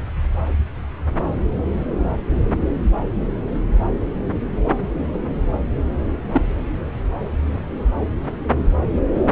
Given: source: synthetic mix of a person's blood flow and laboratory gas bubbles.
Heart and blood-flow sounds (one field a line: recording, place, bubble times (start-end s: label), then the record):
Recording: Doppler ultrasound of blood flow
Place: subclavian vein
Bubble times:
6.32-6.42 s: bubbles
From the record:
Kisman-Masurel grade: 112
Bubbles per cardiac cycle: 1 to 2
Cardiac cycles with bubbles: 1 to 10%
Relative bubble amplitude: moderate (0.250 to 0.450)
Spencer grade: 1 (occasional bubble signal discernible with the cardiac motion signal, with majority of cardiac periods free of bubbles)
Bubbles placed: anywhere in the cardiac cycle